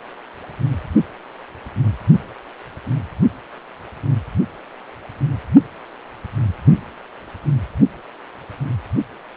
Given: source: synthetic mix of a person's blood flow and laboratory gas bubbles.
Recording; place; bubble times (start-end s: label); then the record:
Doppler ultrasound of blood flow; precordium
no bubbles
From the record:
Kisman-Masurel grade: 000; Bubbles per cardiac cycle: 0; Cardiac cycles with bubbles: 0%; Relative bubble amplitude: no bubbles discernible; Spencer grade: 0 (complete lack of bubble signals)